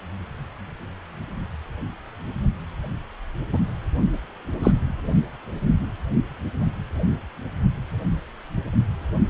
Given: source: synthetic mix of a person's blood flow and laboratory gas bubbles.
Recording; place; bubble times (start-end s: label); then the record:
Doppler ultrasound of blood flow; precordium
3.53-3.58 s: bubbles
4.63-4.71 s: bubbles
From the record:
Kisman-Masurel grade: 123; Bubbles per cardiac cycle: 1 to 2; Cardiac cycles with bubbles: 10 to 50%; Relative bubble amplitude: loud (0.450 to 0.775); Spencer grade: 2 (many but less than half of the cardiac periods contain bubble signals, singularly or in groups); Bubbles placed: only in the low amplitude regions of the cardiac cycle